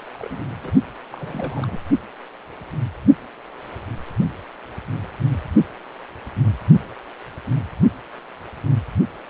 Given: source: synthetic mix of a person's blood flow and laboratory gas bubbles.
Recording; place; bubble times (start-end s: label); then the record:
Doppler ultrasound of blood flow; precordium
0.00-0.03 s: bubbles
0.07-0.12 s: bubbles
0.15-0.72 s: bubbles
1.11-1.80 s: bubbles
From the record:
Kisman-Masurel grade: 221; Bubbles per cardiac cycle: several, 3 to 8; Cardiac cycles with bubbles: 10 to 50%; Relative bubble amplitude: barely perceptible (0.100 to 0.250); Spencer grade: 2 (many but less than half of the cardiac periods contain bubble signals, singularly or in groups); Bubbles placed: only in the low amplitude regions of the cardiac cycle